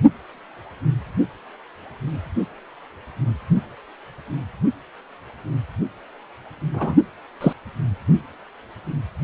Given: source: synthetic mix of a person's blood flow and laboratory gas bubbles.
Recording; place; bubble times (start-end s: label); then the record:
Doppler ultrasound of blood flow; precordium
6.73-6.96 s: bubbles
7.41-7.53 s: bubbles
From the record:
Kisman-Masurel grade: 123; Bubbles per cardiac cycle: 1 to 2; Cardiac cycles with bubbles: 10 to 50%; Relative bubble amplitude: loud (0.450 to 0.775); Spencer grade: 2 (many but less than half of the cardiac periods contain bubble signals, singularly or in groups); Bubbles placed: only in the low amplitude regions of the cardiac cycle